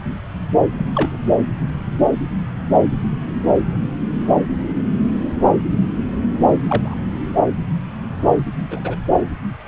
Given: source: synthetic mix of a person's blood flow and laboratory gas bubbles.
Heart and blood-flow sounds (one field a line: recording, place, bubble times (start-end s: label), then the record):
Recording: Doppler ultrasound of blood flow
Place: subclavian vein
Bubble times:
0.71-0.86 s: bubbles
0.94-1.17 s: bubbles
6.67-6.95 s: bubbles
8.71-8.96 s: bubbles
From the record:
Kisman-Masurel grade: 122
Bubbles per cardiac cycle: 1 to 2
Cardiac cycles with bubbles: 10 to 50%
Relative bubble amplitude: moderate (0.250 to 0.450)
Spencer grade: 2 (many but less than half of the cardiac periods contain bubble signals, singularly or in groups)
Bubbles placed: anywhere in the cardiac cycle